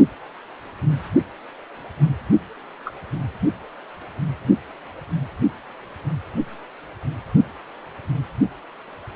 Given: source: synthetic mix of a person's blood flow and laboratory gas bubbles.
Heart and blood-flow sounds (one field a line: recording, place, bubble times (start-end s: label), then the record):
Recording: Doppler ultrasound of blood flow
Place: precordium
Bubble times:
2.85-2.93 s: bubbles
From the record:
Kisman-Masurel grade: 111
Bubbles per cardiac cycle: 1 to 2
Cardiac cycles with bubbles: 1 to 10%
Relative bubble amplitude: barely perceptible (0.100 to 0.250)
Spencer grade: 1 (occasional bubble signal discernible with the cardiac motion signal, with majority of cardiac periods free of bubbles)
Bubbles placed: anywhere in the cardiac cycle